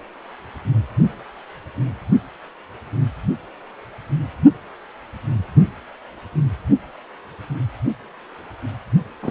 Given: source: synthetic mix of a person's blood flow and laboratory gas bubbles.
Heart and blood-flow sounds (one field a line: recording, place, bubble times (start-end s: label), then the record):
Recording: Doppler ultrasound of blood flow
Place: precordium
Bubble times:
9.22-9.31 s: bubbles
From the record:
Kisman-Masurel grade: 112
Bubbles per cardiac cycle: 1 to 2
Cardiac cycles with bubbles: 1 to 10%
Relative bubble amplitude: moderate (0.250 to 0.450)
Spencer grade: 1 (occasional bubble signal discernible with the cardiac motion signal, with majority of cardiac periods free of bubbles)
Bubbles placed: anywhere in the cardiac cycle